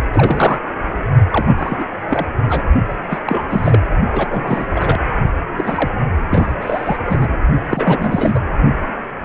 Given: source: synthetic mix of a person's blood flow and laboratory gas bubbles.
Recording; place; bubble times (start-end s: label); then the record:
Doppler ultrasound of blood flow; precordium
0.13-0.59 s: bubbles
1.30-1.84 s: bubbles
2.08-2.27 s: bubbles
2.49-2.64 s: bubbles
3.10-3.21 s: bubbles
3.25-3.42 s: bubbles
3.50-3.81 s: bubbles
4.12-4.67 s: bubbles
4.75-5.00 s: bubbles
5.55-5.89 s: bubbles
6.30-6.54 s: bubbles
6.60-6.98 s: bubbles
7.05-7.27 s: bubbles
7.70-8.39 s: bubbles
From the record:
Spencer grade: 3 (all of the cardiac periods contain showers or single bubble signals, but not dominating or overriding the cardiac motion signals); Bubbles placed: only in the low amplitude regions of the cardiac cycle